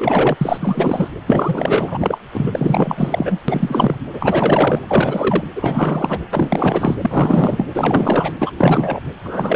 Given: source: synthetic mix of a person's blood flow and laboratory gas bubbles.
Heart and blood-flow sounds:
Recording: Doppler ultrasound of blood flow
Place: precordium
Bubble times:
0.00-0.36 s: bubbles
0.40-1.09 s: bubbles
1.25-2.18 s: bubbles
2.33-3.40 s: bubbles
3.48-3.96 s: bubbles
4.13-4.80 s: bubbles
4.83-5.44 s: bubbles
5.55-6.19 s: bubbles
6.30-6.95 s: bubbles
7.01-7.65 s: bubbles
7.73-8.33 s: bubbles
8.38-8.52 s: bubbles
8.58-9.00 s: bubbles
9.25-9.56 s: bubbles
From the record:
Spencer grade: 4 (maximum detectable bubble signal sounding continuously throughout systole and diastole of every cardiac period, and overriding the amplitude of the normal cardiac signals)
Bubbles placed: anywhere in the cardiac cycle

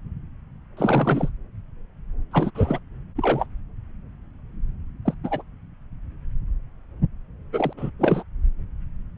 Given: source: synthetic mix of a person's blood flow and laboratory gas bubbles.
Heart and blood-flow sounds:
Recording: Doppler ultrasound of blood flow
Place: subclavian vein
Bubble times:
0.77-1.29 s: bubbles
2.32-2.50 s: bubbles
2.54-2.79 s: bubbles
3.17-3.46 s: bubbles
5.05-5.14 s: bubbles
5.23-5.42 s: bubbles
7.52-7.73 s: bubbles
7.77-7.90 s: bubbles
7.99-8.23 s: bubbles
From the record:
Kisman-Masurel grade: 232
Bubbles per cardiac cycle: several, 3 to 8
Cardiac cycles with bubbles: 50 to 99%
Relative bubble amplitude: moderate (0.250 to 0.450)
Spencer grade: 3 (all of the cardiac periods contain showers or single bubble signals, but not dominating or overriding the cardiac motion signals)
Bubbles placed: anywhere in the cardiac cycle

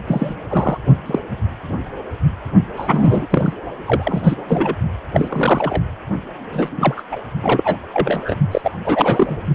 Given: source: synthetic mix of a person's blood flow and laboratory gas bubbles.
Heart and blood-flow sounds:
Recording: Doppler ultrasound of blood flow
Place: precordium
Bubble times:
0.07-0.34 s: bubbles
0.49-0.78 s: bubbles
1.06-1.19 s: bubbles
2.77-3.27 s: bubbles
3.30-3.54 s: bubbles
3.85-4.35 s: bubbles
4.47-4.75 s: bubbles
5.13-5.82 s: bubbles
6.52-6.69 s: bubbles
6.77-7.02 s: bubbles
7.11-7.21 s: bubbles
7.42-7.77 s: bubbles
7.92-8.36 s: bubbles
8.51-8.61 s: bubbles
8.63-8.71 s: bubbles
8.84-9.37 s: bubbles
From the record:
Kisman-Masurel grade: 233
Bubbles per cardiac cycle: several, 3 to 8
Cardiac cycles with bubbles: 50 to 99%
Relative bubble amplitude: loud (0.450 to 0.775)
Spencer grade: 3 (all of the cardiac periods contain showers or single bubble signals, but not dominating or overriding the cardiac motion signals)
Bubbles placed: only in the low amplitude regions of the cardiac cycle

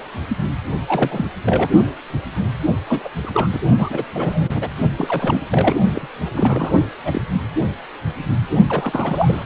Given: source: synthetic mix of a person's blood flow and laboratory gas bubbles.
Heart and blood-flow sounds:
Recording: Doppler ultrasound of blood flow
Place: precordium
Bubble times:
0.87-1.26 s: bubbles
1.43-1.70 s: bubbles
2.86-3.09 s: bubbles
3.23-3.31 s: bubbles
3.33-3.61 s: bubbles
3.77-4.04 s: bubbles
4.14-4.68 s: bubbles
4.96-5.42 s: bubbles
5.51-5.76 s: bubbles
5.95-6.08 s: bubbles
6.32-6.73 s: bubbles
7.05-7.21 s: bubbles
8.67-9.44 s: bubbles
From the record:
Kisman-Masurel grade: 332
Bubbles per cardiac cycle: rolling drumbeat, 9 or more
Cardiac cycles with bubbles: 50 to 99%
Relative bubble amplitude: moderate (0.250 to 0.450)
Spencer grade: 3 (all of the cardiac periods contain showers or single bubble signals, but not dominating or overriding the cardiac motion signals)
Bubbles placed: only in the low amplitude regions of the cardiac cycle

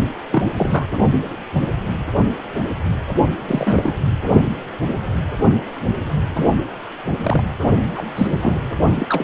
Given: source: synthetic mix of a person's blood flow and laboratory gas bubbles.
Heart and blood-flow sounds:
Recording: Doppler ultrasound of blood flow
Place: precordium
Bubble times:
0.32-0.43 s: bubbles
0.57-0.86 s: bubbles
3.47-3.93 s: bubbles
6.34-6.55 s: bubbles
7.23-7.43 s: bubbles
7.94-8.04 s: bubbles
8.17-8.59 s: bubbles
8.95-9.07 s: bubbles
9.09-9.24 s: bubbles
From the record:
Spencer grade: 3 (all of the cardiac periods contain showers or single bubble signals, but not dominating or overriding the cardiac motion signals)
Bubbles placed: only in the low amplitude regions of the cardiac cycle

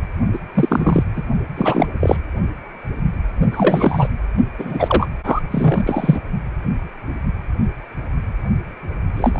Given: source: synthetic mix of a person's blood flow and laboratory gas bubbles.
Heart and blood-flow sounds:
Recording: Doppler ultrasound of blood flow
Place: precordium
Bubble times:
0.33-0.39 s: bubbles
0.54-1.04 s: bubbles
1.16-1.23 s: bubbles
1.57-1.87 s: bubbles
2.00-2.17 s: bubbles
3.52-4.08 s: bubbles
4.57-5.09 s: bubbles
5.23-5.40 s: bubbles
5.51-6.21 s: bubbles
9.16-9.39 s: bubbles
From the record:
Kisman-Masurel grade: 333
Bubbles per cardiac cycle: rolling drumbeat, 9 or more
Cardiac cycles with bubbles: 50 to 99%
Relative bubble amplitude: loud (0.450 to 0.775)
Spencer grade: 3 (all of the cardiac periods contain showers or single bubble signals, but not dominating or overriding the cardiac motion signals)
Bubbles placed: only in the low amplitude regions of the cardiac cycle

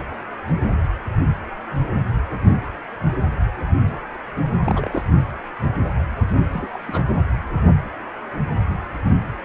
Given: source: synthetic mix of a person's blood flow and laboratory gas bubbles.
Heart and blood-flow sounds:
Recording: Doppler ultrasound of blood flow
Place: precordium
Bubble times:
4.60-5.02 s: bubbles
6.51-6.77 s: bubbles
6.88-7.04 s: bubbles
From the record:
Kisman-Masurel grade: 221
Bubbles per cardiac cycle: several, 3 to 8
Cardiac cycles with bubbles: 10 to 50%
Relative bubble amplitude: barely perceptible (0.100 to 0.250)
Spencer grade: 2 (many but less than half of the cardiac periods contain bubble signals, singularly or in groups)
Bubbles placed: anywhere in the cardiac cycle

